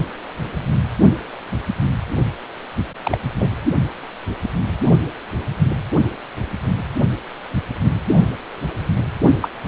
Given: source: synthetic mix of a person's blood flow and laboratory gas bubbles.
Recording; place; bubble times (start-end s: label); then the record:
Doppler ultrasound of blood flow; precordium
3.03-3.18 s: bubbles
3.39-3.51 s: bubbles
9.40-9.49 s: bubbles
From the record:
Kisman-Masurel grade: 122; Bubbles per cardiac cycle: 1 to 2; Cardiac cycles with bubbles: 10 to 50%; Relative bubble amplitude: moderate (0.250 to 0.450); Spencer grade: 2 (many but less than half of the cardiac periods contain bubble signals, singularly or in groups); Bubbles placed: only in the low amplitude regions of the cardiac cycle